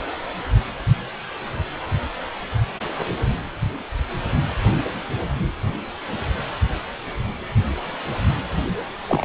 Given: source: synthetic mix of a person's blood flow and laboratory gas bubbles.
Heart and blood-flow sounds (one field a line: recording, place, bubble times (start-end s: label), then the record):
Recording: Doppler ultrasound of blood flow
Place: precordium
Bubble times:
9.07-9.25 s: bubbles
From the record:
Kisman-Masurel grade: 212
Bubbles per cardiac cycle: several, 3 to 8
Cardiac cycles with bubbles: 1 to 10%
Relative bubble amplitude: moderate (0.250 to 0.450)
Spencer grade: 1 (occasional bubble signal discernible with the cardiac motion signal, with majority of cardiac periods free of bubbles)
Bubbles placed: anywhere in the cardiac cycle